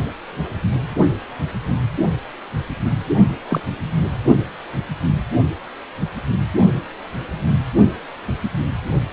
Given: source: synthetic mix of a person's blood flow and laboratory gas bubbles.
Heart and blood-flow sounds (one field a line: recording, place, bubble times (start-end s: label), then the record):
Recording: Doppler ultrasound of blood flow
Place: precordium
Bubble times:
3.50-3.60 s: bubbles
From the record:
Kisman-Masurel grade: 122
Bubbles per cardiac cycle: 1 to 2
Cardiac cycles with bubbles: 10 to 50%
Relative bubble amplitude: moderate (0.250 to 0.450)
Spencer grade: 2 (many but less than half of the cardiac periods contain bubble signals, singularly or in groups)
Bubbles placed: only in the low amplitude regions of the cardiac cycle